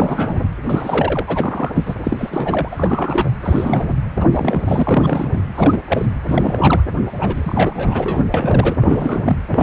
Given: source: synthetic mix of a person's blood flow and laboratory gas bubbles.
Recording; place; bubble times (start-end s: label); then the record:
Doppler ultrasound of blood flow; precordium
0.00-0.48 s: bubbles
0.68-1.70 s: bubbles
1.74-1.96 s: bubbles
2.04-2.69 s: bubbles
2.71-3.31 s: bubbles
3.44-3.98 s: bubbles
4.16-4.27 s: bubbles
4.32-5.42 s: bubbles
5.54-5.80 s: bubbles
5.88-6.11 s: bubbles
6.27-6.81 s: bubbles
7.21-8.23 s: bubbles
8.34-8.75 s: bubbles
8.79-9.36 s: bubbles
9.47-9.63 s: bubbles
From the record:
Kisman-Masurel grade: 342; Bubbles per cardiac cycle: rolling drumbeat, 9 or more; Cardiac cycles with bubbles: 100%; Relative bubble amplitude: moderate (0.250 to 0.450); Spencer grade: 3 (all of the cardiac periods contain showers or single bubble signals, but not dominating or overriding the cardiac motion signals); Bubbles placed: anywhere in the cardiac cycle